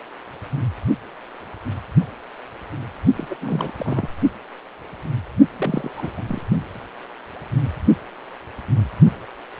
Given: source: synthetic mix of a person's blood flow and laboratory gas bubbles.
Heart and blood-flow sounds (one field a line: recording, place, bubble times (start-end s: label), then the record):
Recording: Doppler ultrasound of blood flow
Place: precordium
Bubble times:
3.16-3.37 s: bubbles
3.41-3.72 s: bubbles
3.77-4.09 s: bubbles
5.57-5.92 s: bubbles
5.97-6.10 s: bubbles
6.17-6.23 s: bubbles
6.28-6.40 s: bubbles
From the record:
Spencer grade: 2 (many but less than half of the cardiac periods contain bubble signals, singularly or in groups)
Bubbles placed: only in the low amplitude regions of the cardiac cycle